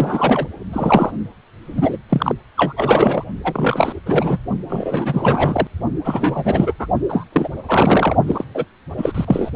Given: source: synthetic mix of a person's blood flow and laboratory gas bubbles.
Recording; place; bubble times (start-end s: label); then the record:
Doppler ultrasound of blood flow; precordium
0.00-0.48 s: bubbles
0.72-1.11 s: bubbles
1.66-1.97 s: bubbles
2.09-2.34 s: bubbles
2.57-2.73 s: bubbles
2.77-3.24 s: bubbles
3.44-3.99 s: bubbles
4.06-4.38 s: bubbles
4.69-5.68 s: bubbles
6.04-6.73 s: bubbles
6.79-6.86 s: bubbles
7.08-7.24 s: bubbles
7.32-7.49 s: bubbles
7.68-8.17 s: bubbles
8.27-8.45 s: bubbles
8.54-8.66 s: bubbles
8.97-9.51 s: bubbles
From the record:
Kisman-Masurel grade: 333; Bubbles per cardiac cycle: rolling drumbeat, 9 or more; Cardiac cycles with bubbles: 50 to 99%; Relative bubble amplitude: loud (0.450 to 0.775); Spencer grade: 3 (all of the cardiac periods contain showers or single bubble signals, but not dominating or overriding the cardiac motion signals); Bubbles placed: only in the low amplitude regions of the cardiac cycle